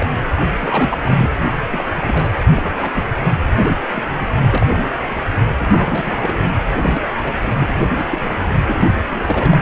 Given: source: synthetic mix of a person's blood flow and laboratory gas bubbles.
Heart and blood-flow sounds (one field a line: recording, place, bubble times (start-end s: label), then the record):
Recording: Doppler ultrasound of blood flow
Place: precordium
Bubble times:
0.00-0.07 s: bubbles
0.53-0.98 s: bubbles
1.01-1.31 s: bubbles
1.34-1.49 s: bubbles
1.69-1.88 s: bubbles
2.01-2.29 s: bubbles
2.54-2.91 s: bubbles
2.96-3.12 s: bubbles
3.53-3.77 s: bubbles
3.94-4.03 s: bubbles
4.52-4.67 s: bubbles
4.71-5.12 s: bubbles
5.58-6.37 s: bubbles
6.75-7.02 s: bubbles
7.24-7.33 s: bubbles
7.58-7.74 s: bubbles
7.97-8.35 s: bubbles
8.54-8.61 s: bubbles
8.67-8.89 s: bubbles
9.08-9.57 s: bubbles
From the record:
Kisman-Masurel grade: 242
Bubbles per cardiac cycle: several, 3 to 8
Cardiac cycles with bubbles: 100%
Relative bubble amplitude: moderate (0.250 to 0.450)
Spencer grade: 3 (all of the cardiac periods contain showers or single bubble signals, but not dominating or overriding the cardiac motion signals)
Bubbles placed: anywhere in the cardiac cycle